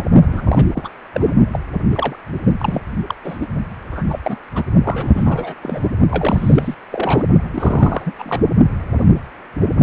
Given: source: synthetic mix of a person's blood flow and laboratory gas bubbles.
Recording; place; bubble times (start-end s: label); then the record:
Doppler ultrasound of blood flow; precordium
0.32-0.65 s: bubbles
0.72-0.89 s: bubbles
1.14-1.32 s: bubbles
1.52-1.59 s: bubbles
1.93-2.16 s: bubbles
2.45-2.52 s: bubbles
2.58-2.82 s: bubbles
3.07-3.15 s: bubbles
3.24-3.47 s: bubbles
3.92-4.04 s: bubbles
4.08-4.20 s: bubbles
4.23-4.38 s: bubbles
4.54-4.63 s: bubbles
4.84-5.54 s: bubbles
5.62-5.89 s: bubbles
6.09-6.75 s: bubbles
6.92-7.25 s: bubbles
7.53-8.12 s: bubbles
8.19-8.40 s: bubbles
From the record:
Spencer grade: 3 (all of the cardiac periods contain showers or single bubble signals, but not dominating or overriding the cardiac motion signals); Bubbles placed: only in the low amplitude regions of the cardiac cycle